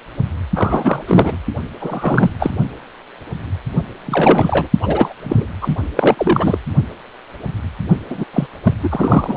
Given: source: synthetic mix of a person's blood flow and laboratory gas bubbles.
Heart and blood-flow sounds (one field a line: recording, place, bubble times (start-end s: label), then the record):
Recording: Doppler ultrasound of blood flow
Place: precordium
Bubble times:
0.55-1.02 s: bubbles
1.07-1.38 s: bubbles
1.79-2.30 s: bubbles
2.39-2.50 s: bubbles
4.05-4.68 s: bubbles
4.82-5.13 s: bubbles
5.23-5.47 s: bubbles
5.61-5.75 s: bubbles
5.96-6.58 s: bubbles
8.09-8.24 s: bubbles
8.33-8.46 s: bubbles
8.64-8.75 s: bubbles
8.83-9.37 s: bubbles
From the record:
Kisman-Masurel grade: 333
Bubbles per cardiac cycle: rolling drumbeat, 9 or more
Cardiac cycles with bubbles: 50 to 99%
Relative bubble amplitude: loud (0.450 to 0.775)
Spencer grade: 3 (all of the cardiac periods contain showers or single bubble signals, but not dominating or overriding the cardiac motion signals)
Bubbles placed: only in the low amplitude regions of the cardiac cycle